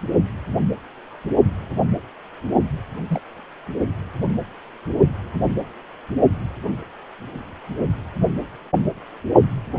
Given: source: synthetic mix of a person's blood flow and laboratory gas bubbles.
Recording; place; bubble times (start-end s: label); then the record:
Doppler ultrasound of blood flow; precordium
3.07-3.21 s: bubbles
From the record:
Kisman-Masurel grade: 111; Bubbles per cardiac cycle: 1 to 2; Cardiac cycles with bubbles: 1 to 10%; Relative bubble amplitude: barely perceptible (0.100 to 0.250); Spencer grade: 1 (occasional bubble signal discernible with the cardiac motion signal, with majority of cardiac periods free of bubbles); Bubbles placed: only in the low amplitude regions of the cardiac cycle